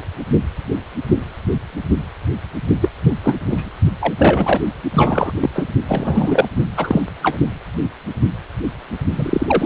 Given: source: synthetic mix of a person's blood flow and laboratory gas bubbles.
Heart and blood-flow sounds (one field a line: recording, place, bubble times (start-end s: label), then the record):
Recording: Doppler ultrasound of blood flow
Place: precordium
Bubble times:
2.81-2.88 s: bubbles
3.04-3.15 s: bubbles
3.23-3.33 s: bubbles
3.49-3.70 s: bubbles
4.00-4.14 s: bubbles
4.17-4.60 s: bubbles
4.93-5.32 s: bubbles
5.40-5.50 s: bubbles
5.54-5.67 s: bubbles
5.88-6.49 s: bubbles
6.77-7.01 s: bubbles
7.22-7.37 s: bubbles
9.16-9.66 s: bubbles
From the record:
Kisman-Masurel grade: 233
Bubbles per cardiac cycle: several, 3 to 8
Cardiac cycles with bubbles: 50 to 99%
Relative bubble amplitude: loud (0.450 to 0.775)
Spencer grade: 3 (all of the cardiac periods contain showers or single bubble signals, but not dominating or overriding the cardiac motion signals)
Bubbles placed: only in the low amplitude regions of the cardiac cycle